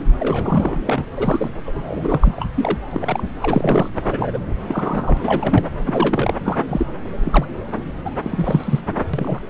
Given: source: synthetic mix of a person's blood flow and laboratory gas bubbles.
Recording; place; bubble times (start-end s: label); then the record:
Doppler ultrasound of blood flow; subclavian vein
0.00-0.03 s: bubbles
0.19-0.80 s: bubbles
0.86-1.05 s: bubbles
1.17-1.52 s: bubbles
1.66-2.33 s: bubbles
2.36-2.48 s: bubbles
2.56-2.79 s: bubbles
2.90-3.23 s: bubbles
3.41-3.90 s: bubbles
3.94-4.40 s: bubbles
4.68-5.17 s: bubbles
5.23-5.65 s: bubbles
5.85-6.33 s: bubbles
6.44-6.58 s: bubbles
6.68-6.86 s: bubbles
7.24-7.45 s: bubbles
8.04-8.11 s: bubbles
8.22-8.80 s: bubbles
9.13-9.42 s: bubbles
From the record:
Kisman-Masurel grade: 242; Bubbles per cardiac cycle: several, 3 to 8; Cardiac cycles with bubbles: 100%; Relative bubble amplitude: moderate (0.250 to 0.450); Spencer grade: 3 (all of the cardiac periods contain showers or single bubble signals, but not dominating or overriding the cardiac motion signals); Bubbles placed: anywhere in the cardiac cycle